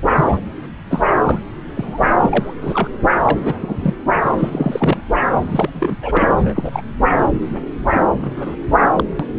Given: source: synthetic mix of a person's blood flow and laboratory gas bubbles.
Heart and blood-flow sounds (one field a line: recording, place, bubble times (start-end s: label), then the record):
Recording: Doppler ultrasound of blood flow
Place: subclavian vein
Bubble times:
0.12-0.40 s: bubbles
0.91-1.02 s: bubbles
1.26-1.41 s: bubbles
1.77-2.08 s: bubbles
2.21-2.54 s: bubbles
2.61-2.89 s: bubbles
3.23-3.95 s: bubbles
4.23-5.00 s: bubbles
5.48-5.69 s: bubbles
5.73-5.95 s: bubbles
6.02-6.81 s: bubbles
7.49-7.58 s: bubbles
7.90-8.06 s: bubbles
8.22-8.31 s: bubbles
8.37-8.56 s: bubbles
8.97-9.04 s: bubbles
9.19-9.25 s: bubbles
From the record:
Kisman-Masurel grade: 242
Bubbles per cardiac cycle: several, 3 to 8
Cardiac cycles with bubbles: 100%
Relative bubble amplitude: moderate (0.250 to 0.450)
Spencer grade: 3 (all of the cardiac periods contain showers or single bubble signals, but not dominating or overriding the cardiac motion signals)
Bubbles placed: anywhere in the cardiac cycle